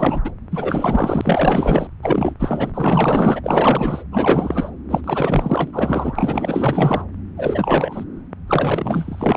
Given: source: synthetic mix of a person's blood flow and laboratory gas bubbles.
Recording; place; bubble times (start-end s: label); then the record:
Doppler ultrasound of blood flow; subclavian vein
0.00-0.21 s: bubbles
0.24-0.31 s: bubbles
0.51-1.87 s: bubbles
2.02-2.35 s: bubbles
2.39-3.41 s: bubbles
3.43-4.04 s: bubbles
4.12-4.71 s: bubbles
4.90-5.01 s: bubbles
5.04-7.04 s: bubbles
7.37-8.04 s: bubbles
8.47-9.37 s: bubbles
From the record:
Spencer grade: 4 (maximum detectable bubble signal sounding continuously throughout systole and diastole of every cardiac period, and overriding the amplitude of the normal cardiac signals); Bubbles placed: anywhere in the cardiac cycle